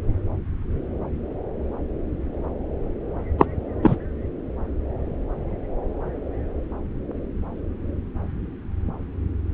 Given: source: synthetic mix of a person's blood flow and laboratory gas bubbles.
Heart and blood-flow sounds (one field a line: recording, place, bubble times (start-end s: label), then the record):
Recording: Doppler ultrasound of blood flow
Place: subclavian vein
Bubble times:
3.38-3.46 s: bubbles
3.82-3.96 s: bubbles
From the record:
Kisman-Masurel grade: 213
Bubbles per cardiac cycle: several, 3 to 8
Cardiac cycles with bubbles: 1 to 10%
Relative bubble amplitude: loud (0.450 to 0.775)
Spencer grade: 1 (occasional bubble signal discernible with the cardiac motion signal, with majority of cardiac periods free of bubbles)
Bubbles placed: anywhere in the cardiac cycle